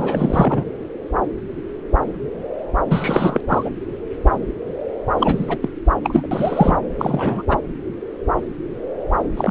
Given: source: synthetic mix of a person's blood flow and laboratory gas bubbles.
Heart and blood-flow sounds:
Doppler ultrasound of blood flow; subclavian vein
0.00-0.64 s: bubbles
2.89-3.41 s: bubbles
3.49-3.70 s: bubbles
5.18-5.57 s: bubbles
5.62-5.69 s: bubbles
6.04-6.27 s: bubbles
6.31-6.78 s: bubbles
6.98-7.44 s: bubbles
7.49-7.58 s: bubbles
9.36-9.51 s: bubbles
From the record:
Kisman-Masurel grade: 332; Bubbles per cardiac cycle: rolling drumbeat, 9 or more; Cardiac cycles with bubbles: 50 to 99%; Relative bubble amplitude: moderate (0.250 to 0.450); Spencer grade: 3 (all of the cardiac periods contain showers or single bubble signals, but not dominating or overriding the cardiac motion signals); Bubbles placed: anywhere in the cardiac cycle

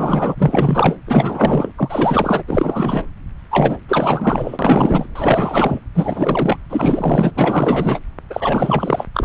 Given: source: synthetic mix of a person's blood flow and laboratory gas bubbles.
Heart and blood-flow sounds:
Doppler ultrasound of blood flow; subclavian vein
0.00-0.35 s: bubbles
0.38-0.97 s: bubbles
1.07-1.71 s: bubbles
1.77-2.43 s: bubbles
2.47-3.06 s: bubbles
3.51-3.78 s: bubbles
3.88-5.07 s: bubbles
5.15-5.79 s: bubbles
5.94-6.58 s: bubbles
6.69-7.31 s: bubbles
7.35-8.00 s: bubbles
8.30-9.06 s: bubbles
9.13-9.25 s: bubbles
From the record:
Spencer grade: 4 (maximum detectable bubble signal sounding continuously throughout systole and diastole of every cardiac period, and overriding the amplitude of the normal cardiac signals); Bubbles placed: anywhere in the cardiac cycle

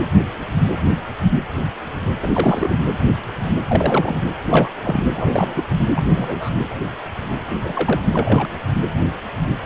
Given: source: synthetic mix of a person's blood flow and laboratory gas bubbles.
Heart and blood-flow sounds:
Doppler ultrasound of blood flow; precordium
2.22-2.75 s: bubbles
3.67-4.21 s: bubbles
4.46-4.69 s: bubbles
4.83-5.05 s: bubbles
5.13-5.63 s: bubbles
5.95-6.50 s: bubbles
7.47-7.55 s: bubbles
7.62-8.02 s: bubbles
8.14-8.48 s: bubbles
From the record:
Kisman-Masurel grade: 222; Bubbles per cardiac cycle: several, 3 to 8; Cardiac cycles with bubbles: 10 to 50%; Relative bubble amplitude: moderate (0.250 to 0.450); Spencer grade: 2 (many but less than half of the cardiac periods contain bubble signals, singularly or in groups); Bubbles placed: anywhere in the cardiac cycle

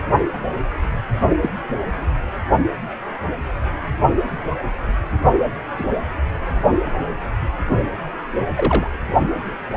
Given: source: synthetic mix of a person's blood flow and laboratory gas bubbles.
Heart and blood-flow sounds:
Doppler ultrasound of blood flow; precordium
1.42-1.49 s: bubbles
5.78-5.85 s: bubbles
8.55-8.90 s: bubbles
From the record:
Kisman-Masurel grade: 122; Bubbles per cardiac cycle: 1 to 2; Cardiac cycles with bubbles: 10 to 50%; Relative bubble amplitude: moderate (0.250 to 0.450); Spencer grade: 2 (many but less than half of the cardiac periods contain bubble signals, singularly or in groups); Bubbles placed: only in the low amplitude regions of the cardiac cycle

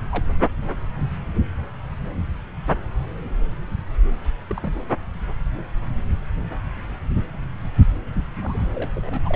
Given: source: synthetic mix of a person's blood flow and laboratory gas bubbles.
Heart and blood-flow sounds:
Doppler ultrasound of blood flow; subclavian vein
0.11-0.24 s: bubbles
4.49-4.76 s: bubbles
8.37-8.68 s: bubbles
8.74-8.91 s: bubbles
8.96-9.36 s: bubbles
From the record:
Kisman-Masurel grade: 221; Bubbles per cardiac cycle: several, 3 to 8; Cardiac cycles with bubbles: 10 to 50%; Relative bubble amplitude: barely perceptible (0.100 to 0.250); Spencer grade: 2 (many but less than half of the cardiac periods contain bubble signals, singularly or in groups); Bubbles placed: anywhere in the cardiac cycle

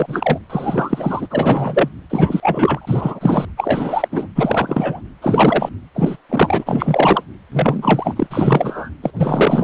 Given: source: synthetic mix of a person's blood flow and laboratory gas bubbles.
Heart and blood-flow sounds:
Doppler ultrasound of blood flow; precordium
0.00-0.40 s: bubbles
0.49-1.27 s: bubbles
1.30-1.90 s: bubbles
2.10-3.45 s: bubbles
3.57-4.08 s: bubbles
4.11-4.26 s: bubbles
4.35-5.01 s: bubbles
5.21-5.69 s: bubbles
5.94-6.17 s: bubbles
6.29-7.23 s: bubbles
7.51-8.27 s: bubbles
8.30-8.90 s: bubbles
9.03-9.11 s: bubbles
9.17-9.64 s: bubbles
From the record:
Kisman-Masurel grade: 343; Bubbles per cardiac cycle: rolling drumbeat, 9 or more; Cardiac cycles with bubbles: 100%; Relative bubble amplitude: loud (0.450 to 0.775); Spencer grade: 3 (all of the cardiac periods contain showers or single bubble signals, but not dominating or overriding the cardiac motion signals); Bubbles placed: anywhere in the cardiac cycle

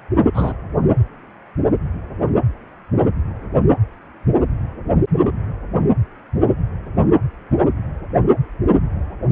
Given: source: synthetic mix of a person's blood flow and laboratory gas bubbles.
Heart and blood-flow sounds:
Doppler ultrasound of blood flow; precordium
0.34-0.54 s: bubbles
From the record:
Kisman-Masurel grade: 112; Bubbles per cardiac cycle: 1 to 2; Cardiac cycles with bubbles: 1 to 10%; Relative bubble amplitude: moderate (0.250 to 0.450); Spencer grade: 1 (occasional bubble signal discernible with the cardiac motion signal, with majority of cardiac periods free of bubbles); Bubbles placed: anywhere in the cardiac cycle

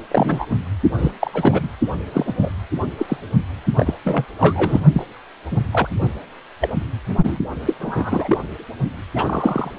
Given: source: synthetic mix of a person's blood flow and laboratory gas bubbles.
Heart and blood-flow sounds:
Doppler ultrasound of blood flow; precordium
0.00-0.03 s: bubbles
0.11-0.45 s: bubbles
0.98-1.11 s: bubbles
1.21-1.31 s: bubbles
1.33-1.68 s: bubbles
2.12-2.33 s: bubbles
2.42-2.50 s: bubbles
2.98-3.17 s: bubbles
3.77-3.94 s: bubbles
4.04-4.25 s: bubbles
4.39-4.80 s: bubbles
4.93-5.05 s: bubbles
5.51-5.57 s: bubbles
5.71-5.88 s: bubbles
6.61-6.69 s: bubbles
7.08-7.15 s: bubbles
7.23-7.39 s: bubbles
7.65-7.74 s: bubbles
7.79-8.38 s: bubbles
9.15-9.71 s: bubbles
From the record:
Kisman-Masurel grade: 242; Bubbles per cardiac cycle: several, 3 to 8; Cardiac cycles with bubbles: 100%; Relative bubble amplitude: moderate (0.250 to 0.450); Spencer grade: 3 (all of the cardiac periods contain showers or single bubble signals, but not dominating or overriding the cardiac motion signals); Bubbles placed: only in the low amplitude regions of the cardiac cycle

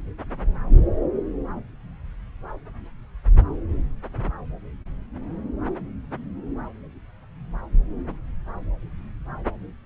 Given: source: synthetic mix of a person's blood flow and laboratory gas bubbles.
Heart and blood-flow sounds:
Doppler ultrasound of blood flow; subclavian vein
no bubbles
From the record:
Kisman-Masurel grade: 000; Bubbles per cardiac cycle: 0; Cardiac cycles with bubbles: 0%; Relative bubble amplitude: no bubbles discernible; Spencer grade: 0 (complete lack of bubble signals)

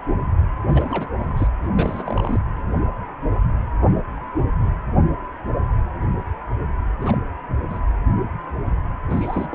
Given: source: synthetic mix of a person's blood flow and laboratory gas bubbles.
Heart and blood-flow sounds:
Doppler ultrasound of blood flow; precordium
0.69-1.10 s: bubbles
1.19-1.47 s: bubbles
1.62-1.68 s: bubbles
1.73-2.39 s: bubbles
6.99-7.18 s: bubbles
7.70-7.81 s: bubbles
9.10-9.55 s: bubbles
From the record:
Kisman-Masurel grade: 221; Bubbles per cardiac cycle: several, 3 to 8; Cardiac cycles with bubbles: 10 to 50%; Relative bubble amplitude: barely perceptible (0.100 to 0.250); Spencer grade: 2 (many but less than half of the cardiac periods contain bubble signals, singularly or in groups); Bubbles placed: anywhere in the cardiac cycle

